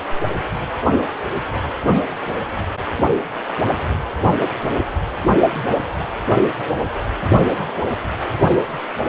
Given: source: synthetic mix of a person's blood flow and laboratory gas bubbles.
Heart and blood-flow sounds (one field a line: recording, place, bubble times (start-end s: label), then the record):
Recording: Doppler ultrasound of blood flow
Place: precordium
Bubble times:
no bubbles
From the record:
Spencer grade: 0 (complete lack of bubble signals)